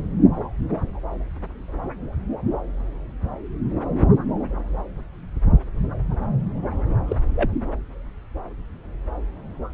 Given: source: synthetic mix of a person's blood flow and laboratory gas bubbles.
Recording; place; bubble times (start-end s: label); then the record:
Doppler ultrasound of blood flow; subclavian vein
7.08-7.16 s: bubbles
7.35-7.50 s: bubbles
From the record:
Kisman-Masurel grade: 112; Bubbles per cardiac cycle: 1 to 2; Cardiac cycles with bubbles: 1 to 10%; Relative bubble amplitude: moderate (0.250 to 0.450); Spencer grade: 1 (occasional bubble signal discernible with the cardiac motion signal, with majority of cardiac periods free of bubbles); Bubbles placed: anywhere in the cardiac cycle